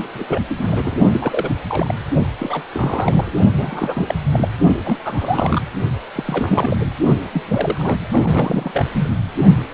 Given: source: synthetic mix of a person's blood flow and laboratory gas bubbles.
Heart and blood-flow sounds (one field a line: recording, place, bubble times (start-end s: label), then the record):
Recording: Doppler ultrasound of blood flow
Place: precordium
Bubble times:
0.00-0.09 s: bubbles
0.13-0.24 s: bubbles
0.27-0.41 s: bubbles
0.48-0.96 s: bubbles
1.11-1.56 s: bubbles
1.68-1.94 s: bubbles
2.39-2.63 s: bubbles
2.72-3.32 s: bubbles
3.56-4.14 s: bubbles
4.32-4.49 s: bubbles
4.84-4.98 s: bubbles
5.04-5.62 s: bubbles
6.15-6.77 s: bubbles
6.80-6.92 s: bubbles
7.33-7.42 s: bubbles
7.48-8.06 s: bubbles
8.11-8.86 s: bubbles
8.94-9.13 s: bubbles
9.71-9.74 s: bubbles
From the record:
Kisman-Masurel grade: 342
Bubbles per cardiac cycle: rolling drumbeat, 9 or more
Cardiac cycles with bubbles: 100%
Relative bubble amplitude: moderate (0.250 to 0.450)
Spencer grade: 3 (all of the cardiac periods contain showers or single bubble signals, but not dominating or overriding the cardiac motion signals)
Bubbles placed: only in the low amplitude regions of the cardiac cycle